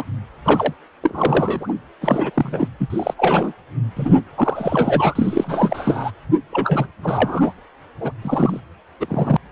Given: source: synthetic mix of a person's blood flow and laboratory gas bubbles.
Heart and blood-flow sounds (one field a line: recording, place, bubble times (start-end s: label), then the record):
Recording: Doppler ultrasound of blood flow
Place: precordium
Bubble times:
0.00-0.05 s: bubbles
0.45-0.73 s: bubbles
1.03-1.73 s: bubbles
2.01-2.30 s: bubbles
2.34-2.67 s: bubbles
2.79-3.13 s: bubbles
3.17-3.52 s: bubbles
3.96-4.21 s: bubbles
4.37-6.11 s: bubbles
6.52-6.87 s: bubbles
7.03-7.53 s: bubbles
8.00-8.12 s: bubbles
8.22-8.60 s: bubbles
9.00-9.37 s: bubbles
From the record:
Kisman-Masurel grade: 343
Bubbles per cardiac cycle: rolling drumbeat, 9 or more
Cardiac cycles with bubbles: 100%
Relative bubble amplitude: loud (0.450 to 0.775)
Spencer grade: 3 (all of the cardiac periods contain showers or single bubble signals, but not dominating or overriding the cardiac motion signals)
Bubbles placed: anywhere in the cardiac cycle